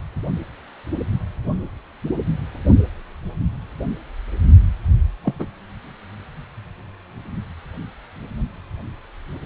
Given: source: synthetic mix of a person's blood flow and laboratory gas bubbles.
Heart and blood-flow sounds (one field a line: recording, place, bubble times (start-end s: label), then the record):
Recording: Doppler ultrasound of blood flow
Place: precordium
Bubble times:
5.24-5.34 s: bubbles
5.38-5.46 s: bubbles
From the record:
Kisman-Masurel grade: 112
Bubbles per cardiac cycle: 1 to 2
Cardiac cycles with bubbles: 1 to 10%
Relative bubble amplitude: moderate (0.250 to 0.450)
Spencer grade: 1 (occasional bubble signal discernible with the cardiac motion signal, with majority of cardiac periods free of bubbles)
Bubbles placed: only in the low amplitude regions of the cardiac cycle